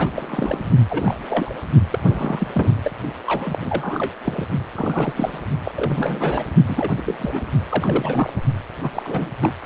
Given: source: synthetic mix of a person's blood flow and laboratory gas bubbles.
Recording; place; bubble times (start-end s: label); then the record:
Doppler ultrasound of blood flow; precordium
0.00-0.10 s: bubbles
0.15-0.64 s: bubbles
0.90-1.16 s: bubbles
1.19-1.54 s: bubbles
1.90-2.00 s: bubbles
2.09-2.71 s: bubbles
2.83-2.91 s: bubbles
3.27-3.58 s: bubbles
3.61-4.14 s: bubbles
4.25-4.46 s: bubbles
4.76-5.40 s: bubbles
5.65-6.45 s: bubbles
6.65-6.92 s: bubbles
6.97-7.03 s: bubbles
7.06-7.46 s: bubbles
7.69-8.31 s: bubbles
8.82-8.91 s: bubbles
8.93-9.31 s: bubbles
9.41-9.54 s: bubbles
9.60-9.66 s: bubbles
From the record:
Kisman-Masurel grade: 342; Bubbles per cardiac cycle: rolling drumbeat, 9 or more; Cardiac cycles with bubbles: 100%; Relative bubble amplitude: moderate (0.250 to 0.450); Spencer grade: 3 (all of the cardiac periods contain showers or single bubble signals, but not dominating or overriding the cardiac motion signals); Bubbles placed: only in the low amplitude regions of the cardiac cycle